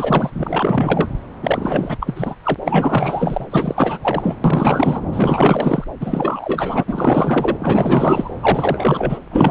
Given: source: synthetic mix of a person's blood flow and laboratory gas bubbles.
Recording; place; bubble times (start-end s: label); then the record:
Doppler ultrasound of blood flow; subclavian vein
0.00-0.30 s: bubbles
0.35-1.07 s: bubbles
1.43-1.97 s: bubbles
2.00-2.35 s: bubbles
2.43-2.55 s: bubbles
2.60-3.46 s: bubbles
3.51-3.98 s: bubbles
4.02-4.37 s: bubbles
4.44-5.01 s: bubbles
5.12-5.84 s: bubbles
6.00-6.83 s: bubbles
6.87-7.57 s: bubbles
7.59-8.30 s: bubbles
8.39-9.19 s: bubbles
9.30-9.51 s: bubbles
From the record:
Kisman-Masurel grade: 444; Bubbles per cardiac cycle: continuous sound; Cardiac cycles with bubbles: 100%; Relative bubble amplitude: maximal (0.775 to 0.999); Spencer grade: 4 (maximum detectable bubble signal sounding continuously throughout systole and diastole of every cardiac period, and overriding the amplitude of the normal cardiac signals); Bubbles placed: anywhere in the cardiac cycle